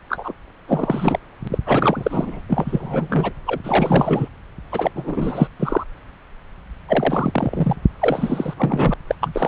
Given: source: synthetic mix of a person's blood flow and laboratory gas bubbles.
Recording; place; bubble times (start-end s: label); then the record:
Doppler ultrasound of blood flow; subclavian vein
0.09-0.33 s: bubbles
0.67-1.19 s: bubbles
1.43-1.48 s: bubbles
1.51-1.58 s: bubbles
1.65-2.42 s: bubbles
2.48-3.32 s: bubbles
3.46-3.60 s: bubbles
3.63-4.29 s: bubbles
4.71-4.91 s: bubbles
4.95-5.47 s: bubbles
5.59-5.83 s: bubbles
6.88-7.76 s: bubbles
8.00-8.54 s: bubbles
8.57-8.94 s: bubbles
9.07-9.15 s: bubbles
9.21-9.48 s: bubbles
From the record:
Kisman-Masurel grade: 343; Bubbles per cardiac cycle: rolling drumbeat, 9 or more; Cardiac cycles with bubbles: 100%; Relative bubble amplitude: loud (0.450 to 0.775); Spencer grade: 3 (all of the cardiac periods contain showers or single bubble signals, but not dominating or overriding the cardiac motion signals); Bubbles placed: anywhere in the cardiac cycle